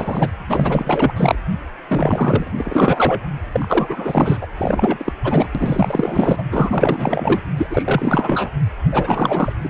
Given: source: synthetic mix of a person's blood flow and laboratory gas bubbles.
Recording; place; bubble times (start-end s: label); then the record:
Doppler ultrasound of blood flow; precordium
0.00-0.29 s: bubbles
0.49-1.12 s: bubbles
1.16-1.35 s: bubbles
1.88-2.52 s: bubbles
2.56-3.28 s: bubbles
3.52-4.46 s: bubbles
4.57-5.12 s: bubbles
5.23-5.49 s: bubbles
5.54-6.43 s: bubbles
6.50-7.39 s: bubbles
7.56-7.67 s: bubbles
7.70-8.49 s: bubbles
8.91-9.53 s: bubbles
9.62-9.70 s: bubbles
From the record:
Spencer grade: 4 (maximum detectable bubble signal sounding continuously throughout systole and diastole of every cardiac period, and overriding the amplitude of the normal cardiac signals); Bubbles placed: anywhere in the cardiac cycle